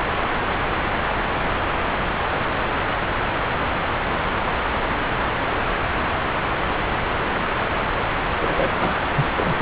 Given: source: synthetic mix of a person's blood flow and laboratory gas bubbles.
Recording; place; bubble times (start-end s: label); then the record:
Doppler ultrasound of blood flow; subclavian vein
8.41-8.71 s: bubbles
8.79-8.93 s: bubbles
9.15-9.26 s: bubbles
9.35-9.62 s: bubbles
From the record:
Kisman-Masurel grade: 211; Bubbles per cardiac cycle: several, 3 to 8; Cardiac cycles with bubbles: 1 to 10%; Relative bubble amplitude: barely perceptible (0.100 to 0.250); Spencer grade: 1 (occasional bubble signal discernible with the cardiac motion signal, with majority of cardiac periods free of bubbles); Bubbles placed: anywhere in the cardiac cycle